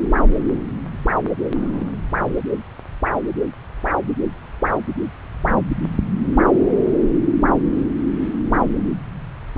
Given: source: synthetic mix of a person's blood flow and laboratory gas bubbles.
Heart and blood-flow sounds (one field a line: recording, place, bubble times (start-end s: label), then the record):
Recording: Doppler ultrasound of blood flow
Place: subclavian vein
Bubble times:
1.55-1.92 s: bubbles
From the record:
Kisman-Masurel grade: 111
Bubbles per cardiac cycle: 1 to 2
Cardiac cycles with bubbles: 1 to 10%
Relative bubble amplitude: barely perceptible (0.100 to 0.250)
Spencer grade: 1 (occasional bubble signal discernible with the cardiac motion signal, with majority of cardiac periods free of bubbles)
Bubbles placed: anywhere in the cardiac cycle